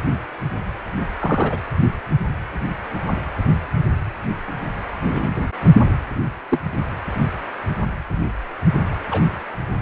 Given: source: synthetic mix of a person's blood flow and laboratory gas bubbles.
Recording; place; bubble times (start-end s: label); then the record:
Doppler ultrasound of blood flow; precordium
1.19-1.57 s: bubbles
5.11-5.27 s: bubbles
6.50-6.60 s: bubbles
9.11-9.22 s: bubbles
From the record:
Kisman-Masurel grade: 122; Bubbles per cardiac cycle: 1 to 2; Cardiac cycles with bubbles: 10 to 50%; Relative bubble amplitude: moderate (0.250 to 0.450); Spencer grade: 2 (many but less than half of the cardiac periods contain bubble signals, singularly or in groups); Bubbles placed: anywhere in the cardiac cycle